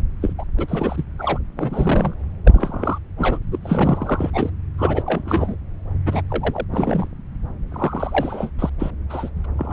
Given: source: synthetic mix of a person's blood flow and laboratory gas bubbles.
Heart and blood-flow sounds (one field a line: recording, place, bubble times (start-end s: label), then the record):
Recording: Doppler ultrasound of blood flow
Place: subclavian vein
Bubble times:
0.21-0.33 s: bubbles
0.38-0.45 s: bubbles
0.58-1.04 s: bubbles
1.18-1.39 s: bubbles
1.57-2.15 s: bubbles
2.44-2.99 s: bubbles
3.18-3.40 s: bubbles
3.52-3.58 s: bubbles
3.62-4.50 s: bubbles
4.78-5.03 s: bubbles
5.06-5.57 s: bubbles
6.05-6.22 s: bubbles
6.30-6.65 s: bubbles
6.71-7.07 s: bubbles
7.71-8.51 s: bubbles
8.58-8.70 s: bubbles
8.79-8.90 s: bubbles
9.09-9.29 s: bubbles
9.57-9.73 s: bubbles
From the record:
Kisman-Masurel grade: 332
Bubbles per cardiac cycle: rolling drumbeat, 9 or more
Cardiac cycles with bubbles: 50 to 99%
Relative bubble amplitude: moderate (0.250 to 0.450)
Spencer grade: 3 (all of the cardiac periods contain showers or single bubble signals, but not dominating or overriding the cardiac motion signals)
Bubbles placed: anywhere in the cardiac cycle